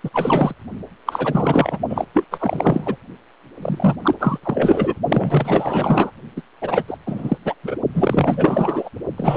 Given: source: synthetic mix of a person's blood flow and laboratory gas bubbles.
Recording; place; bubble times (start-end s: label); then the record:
Doppler ultrasound of blood flow; precordium
0.03-0.10 s: bubbles
0.13-0.54 s: bubbles
1.05-1.78 s: bubbles
1.89-2.05 s: bubbles
2.13-2.25 s: bubbles
2.30-2.97 s: bubbles
3.62-3.96 s: bubbles
4.02-4.14 s: bubbles
4.19-4.38 s: bubbles
4.43-4.94 s: bubbles
5.08-6.11 s: bubbles
6.36-6.42 s: bubbles
6.61-6.83 s: bubbles
6.87-6.98 s: bubbles
7.06-7.38 s: bubbles
7.45-7.54 s: bubbles
7.63-7.77 s: bubbles
7.94-8.90 s: bubbles
9.17-9.37 s: bubbles
From the record:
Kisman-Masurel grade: 444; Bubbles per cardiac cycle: continuous sound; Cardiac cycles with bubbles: 100%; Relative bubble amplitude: maximal (0.775 to 0.999); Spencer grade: 4 (maximum detectable bubble signal sounding continuously throughout systole and diastole of every cardiac period, and overriding the amplitude of the normal cardiac signals); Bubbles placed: only in the low amplitude regions of the cardiac cycle